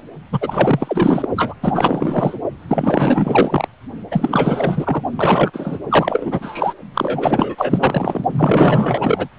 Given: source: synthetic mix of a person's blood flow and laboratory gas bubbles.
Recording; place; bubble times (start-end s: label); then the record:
Doppler ultrasound of blood flow; precordium
0.32-1.29 s: bubbles
1.36-1.54 s: bubbles
1.62-2.36 s: bubbles
2.68-3.67 s: bubbles
4.11-5.01 s: bubbles
5.17-5.50 s: bubbles
5.53-5.78 s: bubbles
5.90-6.74 s: bubbles
6.94-8.25 s: bubbles
8.31-9.29 s: bubbles
From the record:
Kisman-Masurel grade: 444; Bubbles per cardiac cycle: continuous sound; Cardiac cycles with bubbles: 100%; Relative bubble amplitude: maximal (0.775 to 0.999); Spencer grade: 4 (maximum detectable bubble signal sounding continuously throughout systole and diastole of every cardiac period, and overriding the amplitude of the normal cardiac signals); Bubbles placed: only in the low amplitude regions of the cardiac cycle